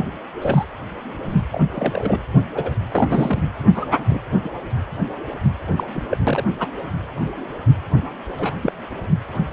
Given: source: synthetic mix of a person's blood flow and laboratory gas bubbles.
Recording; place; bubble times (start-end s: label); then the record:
Doppler ultrasound of blood flow; precordium
0.00-0.07 s: bubbles
0.42-0.65 s: bubbles
1.52-1.64 s: bubbles
1.75-2.18 s: bubbles
2.55-2.71 s: bubbles
2.91-3.43 s: bubbles
3.74-3.85 s: bubbles
4.07-4.20 s: bubbles
4.43-4.50 s: bubbles
5.76-5.84 s: bubbles
5.93-6.02 s: bubbles
6.10-6.17 s: bubbles
6.27-6.44 s: bubbles
6.59-6.67 s: bubbles
8.38-8.53 s: bubbles
8.62-8.72 s: bubbles
From the record:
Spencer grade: 3 (all of the cardiac periods contain showers or single bubble signals, but not dominating or overriding the cardiac motion signals); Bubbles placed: anywhere in the cardiac cycle